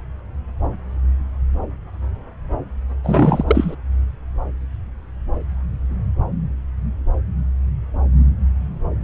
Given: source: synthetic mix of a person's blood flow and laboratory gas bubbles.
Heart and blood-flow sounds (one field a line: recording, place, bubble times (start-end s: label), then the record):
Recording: Doppler ultrasound of blood flow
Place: subclavian vein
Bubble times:
3.03-3.44 s: bubbles
3.46-3.75 s: bubbles
From the record:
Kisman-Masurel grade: 213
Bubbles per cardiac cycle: several, 3 to 8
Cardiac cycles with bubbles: 1 to 10%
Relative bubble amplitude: loud (0.450 to 0.775)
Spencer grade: 1 (occasional bubble signal discernible with the cardiac motion signal, with majority of cardiac periods free of bubbles)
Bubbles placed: anywhere in the cardiac cycle